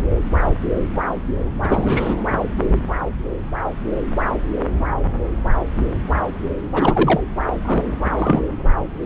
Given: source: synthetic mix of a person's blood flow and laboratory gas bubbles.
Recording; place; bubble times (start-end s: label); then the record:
Doppler ultrasound of blood flow; subclavian vein
1.60-2.17 s: bubbles
6.74-7.21 s: bubbles
7.46-7.54 s: bubbles
7.65-7.85 s: bubbles
8.16-8.42 s: bubbles
From the record:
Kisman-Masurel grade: 223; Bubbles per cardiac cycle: several, 3 to 8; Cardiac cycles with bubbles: 10 to 50%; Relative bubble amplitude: loud (0.450 to 0.775); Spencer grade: 2 (many but less than half of the cardiac periods contain bubble signals, singularly or in groups); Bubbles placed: anywhere in the cardiac cycle